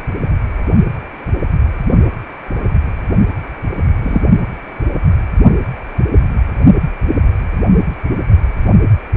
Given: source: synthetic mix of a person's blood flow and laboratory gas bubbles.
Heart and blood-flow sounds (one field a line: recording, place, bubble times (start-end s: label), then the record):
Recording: Doppler ultrasound of blood flow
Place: precordium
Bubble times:
4.02-4.21 s: bubbles
From the record:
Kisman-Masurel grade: 113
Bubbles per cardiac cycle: 1 to 2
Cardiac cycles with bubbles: 1 to 10%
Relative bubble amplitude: loud (0.450 to 0.775)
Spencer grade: 1 (occasional bubble signal discernible with the cardiac motion signal, with majority of cardiac periods free of bubbles)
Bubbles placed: only in the low amplitude regions of the cardiac cycle